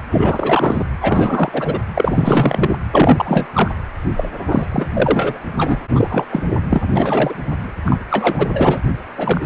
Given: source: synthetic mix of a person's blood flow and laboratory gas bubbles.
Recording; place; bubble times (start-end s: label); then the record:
Doppler ultrasound of blood flow; precordium
0.11-0.85 s: bubbles
1.00-1.79 s: bubbles
1.95-2.78 s: bubbles
2.92-3.47 s: bubbles
3.53-3.71 s: bubbles
4.17-4.29 s: bubbles
4.51-4.67 s: bubbles
4.71-4.87 s: bubbles
4.93-5.38 s: bubbles
5.56-5.79 s: bubbles
5.93-6.25 s: bubbles
6.30-6.42 s: bubbles
6.70-6.81 s: bubbles
6.96-7.34 s: bubbles
7.85-7.98 s: bubbles
8.11-8.48 s: bubbles
8.54-8.78 s: bubbles
9.17-9.46 s: bubbles
From the record:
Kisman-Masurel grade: 343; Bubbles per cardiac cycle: rolling drumbeat, 9 or more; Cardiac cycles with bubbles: 100%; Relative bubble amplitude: loud (0.450 to 0.775); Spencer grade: 3 (all of the cardiac periods contain showers or single bubble signals, but not dominating or overriding the cardiac motion signals); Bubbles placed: anywhere in the cardiac cycle